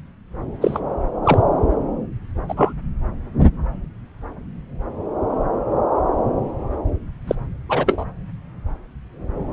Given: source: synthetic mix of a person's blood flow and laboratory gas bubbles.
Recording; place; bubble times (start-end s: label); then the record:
Doppler ultrasound of blood flow; subclavian vein
0.61-0.80 s: bubbles
1.23-1.43 s: bubbles
2.48-2.74 s: bubbles
7.27-7.35 s: bubbles
7.69-8.05 s: bubbles
From the record:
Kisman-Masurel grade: 123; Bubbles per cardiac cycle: 1 to 2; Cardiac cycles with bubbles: 10 to 50%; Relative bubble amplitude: loud (0.450 to 0.775); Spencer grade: 2 (many but less than half of the cardiac periods contain bubble signals, singularly or in groups); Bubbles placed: anywhere in the cardiac cycle